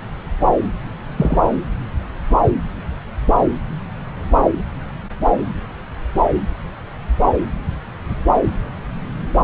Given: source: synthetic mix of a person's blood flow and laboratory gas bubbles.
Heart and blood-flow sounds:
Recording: Doppler ultrasound of blood flow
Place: subclavian vein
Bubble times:
1.17-1.37 s: bubbles
From the record:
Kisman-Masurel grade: 113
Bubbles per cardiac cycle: 1 to 2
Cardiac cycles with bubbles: 1 to 10%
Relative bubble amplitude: loud (0.450 to 0.775)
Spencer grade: 1 (occasional bubble signal discernible with the cardiac motion signal, with majority of cardiac periods free of bubbles)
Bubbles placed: anywhere in the cardiac cycle

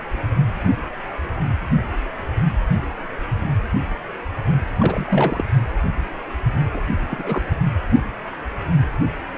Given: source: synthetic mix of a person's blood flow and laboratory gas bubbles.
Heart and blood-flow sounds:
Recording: Doppler ultrasound of blood flow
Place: precordium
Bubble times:
4.80-5.43 s: bubbles
6.74-6.82 s: bubbles
7.11-7.42 s: bubbles
From the record:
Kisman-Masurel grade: 222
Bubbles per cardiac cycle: several, 3 to 8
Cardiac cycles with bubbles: 10 to 50%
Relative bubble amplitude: moderate (0.250 to 0.450)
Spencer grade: 2 (many but less than half of the cardiac periods contain bubble signals, singularly or in groups)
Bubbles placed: only in the low amplitude regions of the cardiac cycle

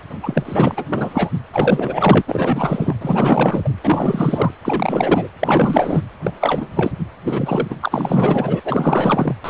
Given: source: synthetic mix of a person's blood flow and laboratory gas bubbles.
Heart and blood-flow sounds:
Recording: Doppler ultrasound of blood flow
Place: precordium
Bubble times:
0.23-0.85 s: bubbles
0.88-1.30 s: bubbles
1.53-2.21 s: bubbles
2.27-2.94 s: bubbles
3.01-3.69 s: bubbles
3.83-4.50 s: bubbles
4.62-5.28 s: bubbles
5.39-6.01 s: bubbles
6.23-6.33 s: bubbles
6.39-6.67 s: bubbles
6.75-6.92 s: bubbles
7.23-7.75 s: bubbles
7.81-8.60 s: bubbles
8.64-9.35 s: bubbles
9.44-9.50 s: bubbles
From the record:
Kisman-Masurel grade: 444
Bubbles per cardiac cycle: continuous sound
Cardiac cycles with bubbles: 100%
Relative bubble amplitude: maximal (0.775 to 0.999)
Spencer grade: 4 (maximum detectable bubble signal sounding continuously throughout systole and diastole of every cardiac period, and overriding the amplitude of the normal cardiac signals)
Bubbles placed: anywhere in the cardiac cycle

